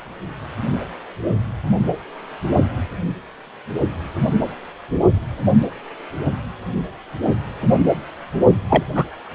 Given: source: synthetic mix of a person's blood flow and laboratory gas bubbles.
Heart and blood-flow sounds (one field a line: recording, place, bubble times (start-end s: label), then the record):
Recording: Doppler ultrasound of blood flow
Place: precordium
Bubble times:
8.69-8.84 s: bubbles
8.94-9.04 s: bubbles
From the record:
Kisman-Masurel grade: 223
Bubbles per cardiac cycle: several, 3 to 8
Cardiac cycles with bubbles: 10 to 50%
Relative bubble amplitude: loud (0.450 to 0.775)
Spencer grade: 2 (many but less than half of the cardiac periods contain bubble signals, singularly or in groups)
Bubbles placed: only in the low amplitude regions of the cardiac cycle